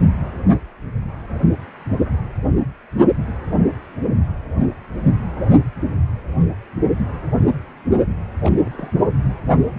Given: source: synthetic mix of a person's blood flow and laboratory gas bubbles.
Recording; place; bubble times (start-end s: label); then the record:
Doppler ultrasound of blood flow; precordium
8.43-8.50 s: bubbles
8.60-8.91 s: bubbles
From the record:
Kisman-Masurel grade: 211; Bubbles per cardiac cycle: several, 3 to 8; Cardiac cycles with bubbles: 1 to 10%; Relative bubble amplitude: barely perceptible (0.100 to 0.250); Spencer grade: 1 (occasional bubble signal discernible with the cardiac motion signal, with majority of cardiac periods free of bubbles); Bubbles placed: only in the low amplitude regions of the cardiac cycle